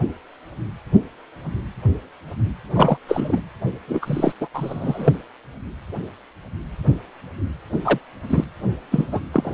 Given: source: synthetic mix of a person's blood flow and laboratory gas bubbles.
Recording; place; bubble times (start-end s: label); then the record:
Doppler ultrasound of blood flow; precordium
2.73-2.97 s: bubbles
3.08-3.42 s: bubbles
3.88-4.32 s: bubbles
4.40-4.47 s: bubbles
4.53-5.12 s: bubbles
7.84-7.98 s: bubbles
8.29-8.44 s: bubbles
8.91-9.08 s: bubbles
9.12-9.21 s: bubbles
9.32-9.54 s: bubbles
From the record:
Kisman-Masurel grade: 223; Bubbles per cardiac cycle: several, 3 to 8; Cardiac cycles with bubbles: 10 to 50%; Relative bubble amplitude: loud (0.450 to 0.775); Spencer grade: 2 (many but less than half of the cardiac periods contain bubble signals, singularly or in groups); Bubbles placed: anywhere in the cardiac cycle